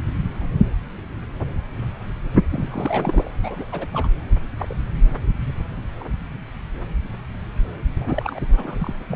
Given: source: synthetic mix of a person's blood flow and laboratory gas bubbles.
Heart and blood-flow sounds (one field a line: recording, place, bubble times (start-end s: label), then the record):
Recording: Doppler ultrasound of blood flow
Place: subclavian vein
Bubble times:
2.49-3.31 s: bubbles
3.42-3.65 s: bubbles
3.71-4.08 s: bubbles
4.58-4.75 s: bubbles
6.00-6.04 s: bubbles
7.79-7.83 s: bubbles
7.85-8.39 s: bubbles
8.50-8.94 s: bubbles
9.09-9.16 s: bubbles
From the record:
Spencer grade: 2 (many but less than half of the cardiac periods contain bubble signals, singularly or in groups)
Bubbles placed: anywhere in the cardiac cycle